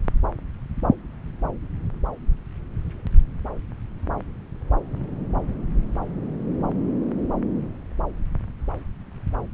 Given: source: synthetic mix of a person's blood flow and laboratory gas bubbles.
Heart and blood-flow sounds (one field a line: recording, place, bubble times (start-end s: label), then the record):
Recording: Doppler ultrasound of blood flow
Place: subclavian vein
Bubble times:
no bubbles
From the record:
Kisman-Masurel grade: 000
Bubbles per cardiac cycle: 0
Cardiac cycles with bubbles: 0%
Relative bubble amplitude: no bubbles discernible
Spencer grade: 0 (complete lack of bubble signals)